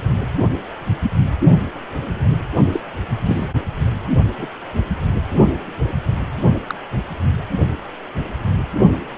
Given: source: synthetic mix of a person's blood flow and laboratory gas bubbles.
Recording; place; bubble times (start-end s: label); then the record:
Doppler ultrasound of blood flow; precordium
2.73-2.81 s: bubbles
3.25-3.50 s: bubbles
4.38-4.46 s: bubbles
6.68-6.75 s: bubbles
From the record:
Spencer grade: 2 (many but less than half of the cardiac periods contain bubble signals, singularly or in groups); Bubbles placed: only in the low amplitude regions of the cardiac cycle